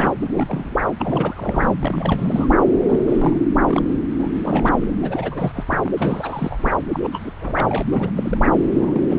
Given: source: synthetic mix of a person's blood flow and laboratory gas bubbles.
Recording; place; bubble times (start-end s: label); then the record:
Doppler ultrasound of blood flow; subclavian vein
0.00-0.14 s: bubbles
0.21-0.76 s: bubbles
0.99-1.71 s: bubbles
1.79-2.47 s: bubbles
2.88-2.99 s: bubbles
3.06-3.46 s: bubbles
3.57-3.91 s: bubbles
4.18-4.29 s: bubbles
4.35-4.76 s: bubbles
4.80-4.92 s: bubbles
5.01-5.52 s: bubbles
5.54-5.63 s: bubbles
5.67-5.92 s: bubbles
5.97-6.74 s: bubbles
6.92-7.00 s: bubbles
7.03-7.08 s: bubbles
7.11-7.31 s: bubbles
7.40-7.83 s: bubbles
7.90-8.12 s: bubbles
8.16-8.38 s: bubbles
8.44-8.49 s: bubbles
8.76-9.19 s: bubbles
From the record:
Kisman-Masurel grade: 342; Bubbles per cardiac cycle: rolling drumbeat, 9 or more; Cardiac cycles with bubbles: 100%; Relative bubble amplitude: moderate (0.250 to 0.450); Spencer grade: 3 (all of the cardiac periods contain showers or single bubble signals, but not dominating or overriding the cardiac motion signals); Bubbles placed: anywhere in the cardiac cycle